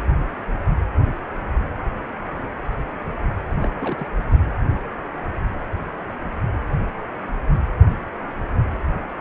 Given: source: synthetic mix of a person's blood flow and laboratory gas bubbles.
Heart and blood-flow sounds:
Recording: Doppler ultrasound of blood flow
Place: precordium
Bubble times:
3.58-3.74 s: bubbles
3.80-4.07 s: bubbles
From the record:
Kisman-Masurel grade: 211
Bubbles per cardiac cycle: several, 3 to 8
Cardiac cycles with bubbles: 1 to 10%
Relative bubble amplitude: barely perceptible (0.100 to 0.250)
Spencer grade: 1 (occasional bubble signal discernible with the cardiac motion signal, with majority of cardiac periods free of bubbles)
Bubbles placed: only in the low amplitude regions of the cardiac cycle

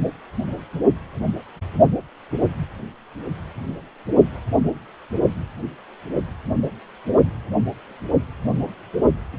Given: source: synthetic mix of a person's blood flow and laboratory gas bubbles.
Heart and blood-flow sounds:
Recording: Doppler ultrasound of blood flow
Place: precordium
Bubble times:
no bubbles
From the record:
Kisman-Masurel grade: 000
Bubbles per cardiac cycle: 0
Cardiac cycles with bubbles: 0%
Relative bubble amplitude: no bubbles discernible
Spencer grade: 0 (complete lack of bubble signals)

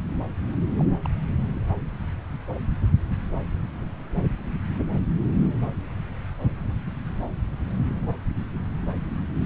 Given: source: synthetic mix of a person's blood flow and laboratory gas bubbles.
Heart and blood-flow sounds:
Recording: Doppler ultrasound of blood flow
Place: subclavian vein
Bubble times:
0.77-0.85 s: bubbles
1.04-1.09 s: bubbles
From the record:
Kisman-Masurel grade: 111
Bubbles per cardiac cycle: 1 to 2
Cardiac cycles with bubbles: 1 to 10%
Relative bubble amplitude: barely perceptible (0.100 to 0.250)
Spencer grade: 1 (occasional bubble signal discernible with the cardiac motion signal, with majority of cardiac periods free of bubbles)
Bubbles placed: anywhere in the cardiac cycle

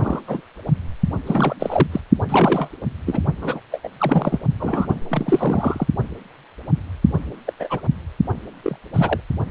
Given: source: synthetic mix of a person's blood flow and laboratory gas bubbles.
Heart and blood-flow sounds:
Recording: Doppler ultrasound of blood flow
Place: precordium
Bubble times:
0.00-0.22 s: bubbles
0.27-0.41 s: bubbles
1.26-1.55 s: bubbles
1.59-1.87 s: bubbles
1.92-2.00 s: bubbles
2.28-2.69 s: bubbles
3.05-3.19 s: bubbles
3.42-3.60 s: bubbles
3.71-3.80 s: bubbles
3.83-3.88 s: bubbles
3.98-4.39 s: bubbles
4.59-4.94 s: bubbles
5.10-5.87 s: bubbles
7.46-7.53 s: bubbles
7.59-7.80 s: bubbles
8.64-8.76 s: bubbles
8.94-9.20 s: bubbles
From the record:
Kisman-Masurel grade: 232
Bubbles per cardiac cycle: several, 3 to 8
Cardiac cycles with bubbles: 50 to 99%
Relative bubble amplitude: moderate (0.250 to 0.450)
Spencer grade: 3 (all of the cardiac periods contain showers or single bubble signals, but not dominating or overriding the cardiac motion signals)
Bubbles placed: only in the low amplitude regions of the cardiac cycle

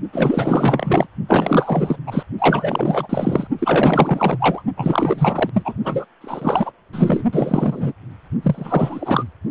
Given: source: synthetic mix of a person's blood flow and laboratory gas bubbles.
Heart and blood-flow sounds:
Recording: Doppler ultrasound of blood flow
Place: precordium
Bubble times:
0.12-1.07 s: bubbles
1.28-1.97 s: bubbles
2.06-2.23 s: bubbles
2.38-3.47 s: bubbles
3.58-4.62 s: bubbles
4.77-5.50 s: bubbles
5.54-5.74 s: bubbles
5.84-6.06 s: bubbles
6.21-6.71 s: bubbles
6.93-7.24 s: bubbles
7.32-7.93 s: bubbles
8.43-9.24 s: bubbles
From the record:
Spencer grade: 4 (maximum detectable bubble signal sounding continuously throughout systole and diastole of every cardiac period, and overriding the amplitude of the normal cardiac signals)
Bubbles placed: only in the low amplitude regions of the cardiac cycle

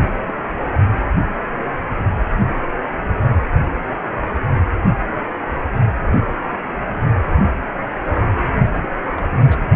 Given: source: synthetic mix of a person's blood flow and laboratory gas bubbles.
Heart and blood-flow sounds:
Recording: Doppler ultrasound of blood flow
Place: precordium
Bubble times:
0.15-0.20 s: bubbles
0.29-0.32 s: bubbles
0.92-0.98 s: bubbles
8.70-8.88 s: bubbles
8.90-8.95 s: bubbles
9.17-9.26 s: bubbles
9.40-9.68 s: bubbles
From the record:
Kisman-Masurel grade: 221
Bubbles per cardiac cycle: several, 3 to 8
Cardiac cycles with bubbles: 10 to 50%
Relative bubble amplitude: barely perceptible (0.100 to 0.250)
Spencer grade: 2 (many but less than half of the cardiac periods contain bubble signals, singularly or in groups)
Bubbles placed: only in the low amplitude regions of the cardiac cycle

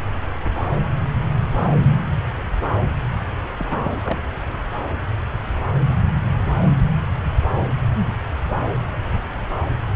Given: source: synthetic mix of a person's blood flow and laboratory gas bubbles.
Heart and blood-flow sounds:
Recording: Doppler ultrasound of blood flow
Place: subclavian vein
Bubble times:
3.59-3.97 s: bubbles
4.05-4.19 s: bubbles
From the record:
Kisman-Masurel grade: 211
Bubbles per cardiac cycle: several, 3 to 8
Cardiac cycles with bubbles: 1 to 10%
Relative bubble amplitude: barely perceptible (0.100 to 0.250)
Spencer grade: 1 (occasional bubble signal discernible with the cardiac motion signal, with majority of cardiac periods free of bubbles)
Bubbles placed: anywhere in the cardiac cycle

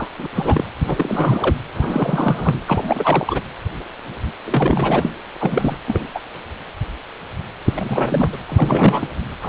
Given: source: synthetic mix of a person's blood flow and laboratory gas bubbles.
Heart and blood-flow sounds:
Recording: Doppler ultrasound of blood flow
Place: precordium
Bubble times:
0.00-0.07 s: bubbles
0.18-0.28 s: bubbles
0.34-0.65 s: bubbles
0.86-1.55 s: bubbles
1.74-2.59 s: bubbles
2.67-3.40 s: bubbles
4.46-5.10 s: bubbles
5.38-5.77 s: bubbles
5.87-6.19 s: bubbles
7.65-8.38 s: bubbles
8.48-9.08 s: bubbles
9.42-9.49 s: bubbles
From the record:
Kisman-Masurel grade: 332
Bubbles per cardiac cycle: rolling drumbeat, 9 or more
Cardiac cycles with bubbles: 50 to 99%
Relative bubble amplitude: moderate (0.250 to 0.450)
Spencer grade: 3 (all of the cardiac periods contain showers or single bubble signals, but not dominating or overriding the cardiac motion signals)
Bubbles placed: anywhere in the cardiac cycle

